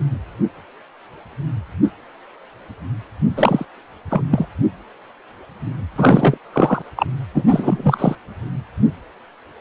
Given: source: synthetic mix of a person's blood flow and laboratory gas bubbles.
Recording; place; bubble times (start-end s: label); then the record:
Doppler ultrasound of blood flow; precordium
3.36-3.65 s: bubbles
4.10-4.23 s: bubbles
4.30-4.46 s: bubbles
5.96-6.38 s: bubbles
6.52-6.82 s: bubbles
6.96-7.06 s: bubbles
7.34-8.16 s: bubbles
From the record:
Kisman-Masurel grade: 233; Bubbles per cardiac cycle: several, 3 to 8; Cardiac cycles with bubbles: 50 to 99%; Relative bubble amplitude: loud (0.450 to 0.775); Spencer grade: 3 (all of the cardiac periods contain showers or single bubble signals, but not dominating or overriding the cardiac motion signals); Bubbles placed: anywhere in the cardiac cycle